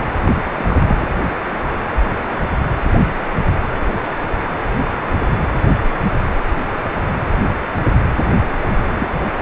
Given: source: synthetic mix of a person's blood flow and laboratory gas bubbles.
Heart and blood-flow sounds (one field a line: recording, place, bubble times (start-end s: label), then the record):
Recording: Doppler ultrasound of blood flow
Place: precordium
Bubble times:
0.25-0.34 s: bubbles
0.57-0.65 s: bubbles
0.68-0.76 s: bubbles
0.79-1.08 s: bubbles
8.46-8.73 s: bubbles
8.86-9.08 s: bubbles
9.12-9.41 s: bubbles
From the record:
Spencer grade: 2 (many but less than half of the cardiac periods contain bubble signals, singularly or in groups)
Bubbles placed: anywhere in the cardiac cycle